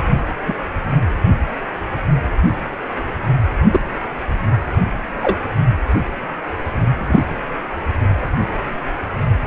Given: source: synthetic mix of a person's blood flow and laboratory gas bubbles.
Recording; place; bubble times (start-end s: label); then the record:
Doppler ultrasound of blood flow; precordium
0.45-0.56 s: bubbles
3.71-3.80 s: bubbles
5.22-5.38 s: bubbles
6.97-7.39 s: bubbles
8.21-8.29 s: bubbles
From the record:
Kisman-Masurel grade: 123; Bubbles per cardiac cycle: 1 to 2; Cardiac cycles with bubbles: 10 to 50%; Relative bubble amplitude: loud (0.450 to 0.775); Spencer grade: 2 (many but less than half of the cardiac periods contain bubble signals, singularly or in groups); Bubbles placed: only in the low amplitude regions of the cardiac cycle